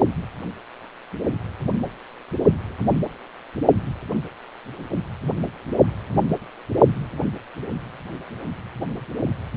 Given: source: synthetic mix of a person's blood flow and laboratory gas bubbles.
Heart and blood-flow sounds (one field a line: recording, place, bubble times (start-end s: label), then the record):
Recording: Doppler ultrasound of blood flow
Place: precordium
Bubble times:
no bubbles
From the record:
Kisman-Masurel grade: 000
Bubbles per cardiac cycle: 0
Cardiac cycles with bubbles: 0%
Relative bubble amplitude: no bubbles discernible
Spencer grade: 0 (complete lack of bubble signals)